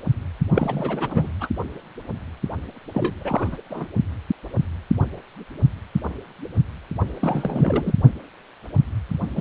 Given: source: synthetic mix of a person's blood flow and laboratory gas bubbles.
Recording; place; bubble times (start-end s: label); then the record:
Doppler ultrasound of blood flow; precordium
0.53-1.30 s: bubbles
1.41-1.48 s: bubbles
2.93-3.57 s: bubbles
3.70-3.87 s: bubbles
7.21-7.96 s: bubbles
9.36-9.41 s: bubbles
From the record:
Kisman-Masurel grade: 332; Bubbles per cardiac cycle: rolling drumbeat, 9 or more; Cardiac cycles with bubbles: 50 to 99%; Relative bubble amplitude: moderate (0.250 to 0.450); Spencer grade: 3 (all of the cardiac periods contain showers or single bubble signals, but not dominating or overriding the cardiac motion signals); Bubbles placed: only in the low amplitude regions of the cardiac cycle